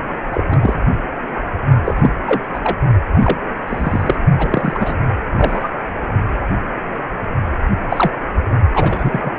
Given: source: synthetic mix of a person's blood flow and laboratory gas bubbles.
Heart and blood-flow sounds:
Doppler ultrasound of blood flow; precordium
0.32-0.44 s: bubbles
0.50-0.79 s: bubbles
1.85-2.10 s: bubbles
2.26-2.43 s: bubbles
2.53-2.59 s: bubbles
2.63-2.76 s: bubbles
3.13-3.38 s: bubbles
3.67-4.16 s: bubbles
4.38-4.98 s: bubbles
5.37-5.69 s: bubbles
7.90-8.11 s: bubbles
8.74-9.32 s: bubbles
From the record:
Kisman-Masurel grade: 233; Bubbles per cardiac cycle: several, 3 to 8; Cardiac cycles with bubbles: 50 to 99%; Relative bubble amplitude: loud (0.450 to 0.775); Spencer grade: 3 (all of the cardiac periods contain showers or single bubble signals, but not dominating or overriding the cardiac motion signals); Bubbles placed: only in the low amplitude regions of the cardiac cycle

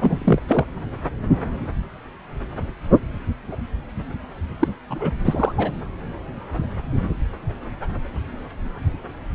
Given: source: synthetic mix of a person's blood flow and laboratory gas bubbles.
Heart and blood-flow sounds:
Doppler ultrasound of blood flow; subclavian vein
0.00-0.39 s: bubbles
0.48-0.65 s: bubbles
4.59-4.67 s: bubbles
4.89-5.12 s: bubbles
5.25-5.52 s: bubbles
5.56-5.72 s: bubbles
From the record:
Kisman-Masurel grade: 222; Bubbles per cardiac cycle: several, 3 to 8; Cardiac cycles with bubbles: 10 to 50%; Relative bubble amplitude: moderate (0.250 to 0.450); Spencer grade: 2 (many but less than half of the cardiac periods contain bubble signals, singularly or in groups); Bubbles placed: anywhere in the cardiac cycle

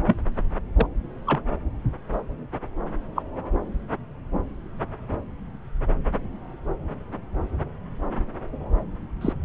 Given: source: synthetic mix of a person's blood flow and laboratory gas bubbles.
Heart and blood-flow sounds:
Doppler ultrasound of blood flow; subclavian vein
0.06-0.16 s: bubbles
0.76-0.86 s: bubbles
1.26-1.41 s: bubbles
3.15-3.23 s: bubbles
9.21-9.33 s: bubbles
From the record:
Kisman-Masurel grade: 122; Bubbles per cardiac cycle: 1 to 2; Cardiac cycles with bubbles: 10 to 50%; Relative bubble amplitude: moderate (0.250 to 0.450); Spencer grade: 2 (many but less than half of the cardiac periods contain bubble signals, singularly or in groups); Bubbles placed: anywhere in the cardiac cycle

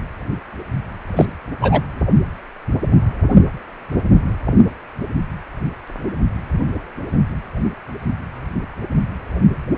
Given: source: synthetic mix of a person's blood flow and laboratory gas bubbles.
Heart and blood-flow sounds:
Doppler ultrasound of blood flow; precordium
1.16-1.25 s: bubbles
1.61-1.82 s: bubbles
From the record:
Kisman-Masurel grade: 113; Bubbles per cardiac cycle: 1 to 2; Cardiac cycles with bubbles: 1 to 10%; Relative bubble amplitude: loud (0.450 to 0.775); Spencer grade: 1 (occasional bubble signal discernible with the cardiac motion signal, with majority of cardiac periods free of bubbles); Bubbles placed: anywhere in the cardiac cycle

